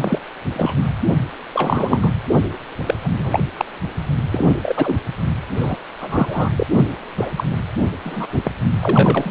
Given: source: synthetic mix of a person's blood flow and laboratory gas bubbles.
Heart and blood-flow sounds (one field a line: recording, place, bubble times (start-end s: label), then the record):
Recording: Doppler ultrasound of blood flow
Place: precordium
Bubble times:
0.00-0.20 s: bubbles
0.56-0.89 s: bubbles
1.09-1.15 s: bubbles
1.54-2.13 s: bubbles
2.85-2.95 s: bubbles
3.04-3.08 s: bubbles
3.19-3.40 s: bubbles
3.57-3.65 s: bubbles
4.31-4.53 s: bubbles
4.62-4.96 s: bubbles
5.56-5.77 s: bubbles
6.01-6.50 s: bubbles
6.56-6.67 s: bubbles
7.17-7.32 s: bubbles
7.37-7.44 s: bubbles
8.04-8.26 s: bubbles
8.32-8.52 s: bubbles
8.80-9.30 s: bubbles
From the record:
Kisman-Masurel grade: 243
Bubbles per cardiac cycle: several, 3 to 8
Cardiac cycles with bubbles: 100%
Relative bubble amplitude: loud (0.450 to 0.775)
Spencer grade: 3 (all of the cardiac periods contain showers or single bubble signals, but not dominating or overriding the cardiac motion signals)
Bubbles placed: anywhere in the cardiac cycle